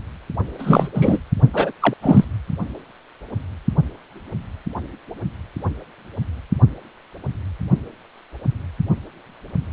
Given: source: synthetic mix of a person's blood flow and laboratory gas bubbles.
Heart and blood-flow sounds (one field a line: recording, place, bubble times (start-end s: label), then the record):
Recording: Doppler ultrasound of blood flow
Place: precordium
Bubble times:
0.58-0.88 s: bubbles
0.93-1.19 s: bubbles
1.53-1.72 s: bubbles
1.80-1.94 s: bubbles
2.02-2.25 s: bubbles
From the record:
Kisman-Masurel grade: 223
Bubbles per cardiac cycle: several, 3 to 8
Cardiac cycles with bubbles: 10 to 50%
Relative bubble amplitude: loud (0.450 to 0.775)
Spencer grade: 2 (many but less than half of the cardiac periods contain bubble signals, singularly or in groups)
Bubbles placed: only in the low amplitude regions of the cardiac cycle